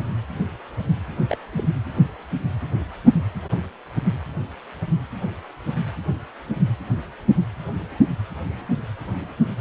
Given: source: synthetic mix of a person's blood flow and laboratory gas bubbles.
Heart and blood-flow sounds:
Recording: Doppler ultrasound of blood flow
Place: precordium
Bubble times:
1.29-1.37 s: bubbles
1.52-1.67 s: bubbles
From the record:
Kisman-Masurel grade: 111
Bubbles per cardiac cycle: 1 to 2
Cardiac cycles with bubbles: 1 to 10%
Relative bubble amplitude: barely perceptible (0.100 to 0.250)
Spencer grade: 1 (occasional bubble signal discernible with the cardiac motion signal, with majority of cardiac periods free of bubbles)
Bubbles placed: anywhere in the cardiac cycle

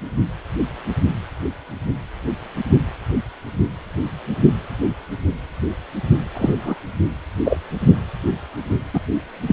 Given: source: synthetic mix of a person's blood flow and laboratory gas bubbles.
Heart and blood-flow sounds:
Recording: Doppler ultrasound of blood flow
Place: precordium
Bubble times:
6.35-6.75 s: bubbles
7.44-7.57 s: bubbles
8.93-9.00 s: bubbles
9.47-9.53 s: bubbles
From the record:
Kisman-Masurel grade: 123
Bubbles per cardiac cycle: 1 to 2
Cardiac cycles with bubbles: 10 to 50%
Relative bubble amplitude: loud (0.450 to 0.775)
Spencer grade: 2 (many but less than half of the cardiac periods contain bubble signals, singularly or in groups)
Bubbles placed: anywhere in the cardiac cycle

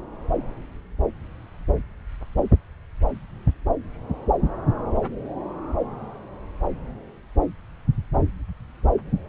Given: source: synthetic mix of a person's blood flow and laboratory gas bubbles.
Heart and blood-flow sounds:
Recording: Doppler ultrasound of blood flow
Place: subclavian vein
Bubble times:
no bubbles
From the record:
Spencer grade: 0 (complete lack of bubble signals)

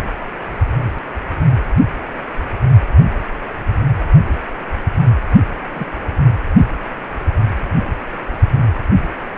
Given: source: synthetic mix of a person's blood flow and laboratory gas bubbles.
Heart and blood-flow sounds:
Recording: Doppler ultrasound of blood flow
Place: precordium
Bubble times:
5.75-5.85 s: bubbles
From the record:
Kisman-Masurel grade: 123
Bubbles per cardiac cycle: 1 to 2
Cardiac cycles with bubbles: 10 to 50%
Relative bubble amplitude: loud (0.450 to 0.775)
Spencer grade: 2 (many but less than half of the cardiac periods contain bubble signals, singularly or in groups)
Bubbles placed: only in the low amplitude regions of the cardiac cycle

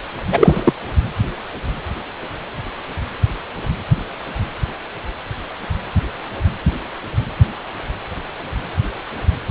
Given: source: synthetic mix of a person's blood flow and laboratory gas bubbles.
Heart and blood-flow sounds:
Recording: Doppler ultrasound of blood flow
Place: precordium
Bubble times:
0.32-0.73 s: bubbles
From the record:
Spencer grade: 1 (occasional bubble signal discernible with the cardiac motion signal, with majority of cardiac periods free of bubbles)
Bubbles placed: anywhere in the cardiac cycle

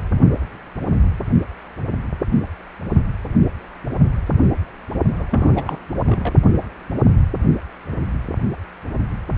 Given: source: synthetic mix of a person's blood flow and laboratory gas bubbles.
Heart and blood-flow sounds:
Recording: Doppler ultrasound of blood flow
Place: precordium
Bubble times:
5.20-5.23 s: bubbles
5.30-5.79 s: bubbles
6.04-6.36 s: bubbles
From the record:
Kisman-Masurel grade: 212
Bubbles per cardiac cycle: several, 3 to 8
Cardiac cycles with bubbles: 1 to 10%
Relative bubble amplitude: moderate (0.250 to 0.450)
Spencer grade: 1 (occasional bubble signal discernible with the cardiac motion signal, with majority of cardiac periods free of bubbles)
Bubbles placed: only in the low amplitude regions of the cardiac cycle

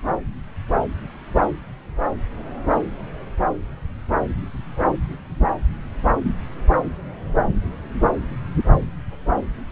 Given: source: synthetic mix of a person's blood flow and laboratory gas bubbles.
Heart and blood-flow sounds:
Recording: Doppler ultrasound of blood flow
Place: subclavian vein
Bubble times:
no bubbles
From the record:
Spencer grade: 0 (complete lack of bubble signals)

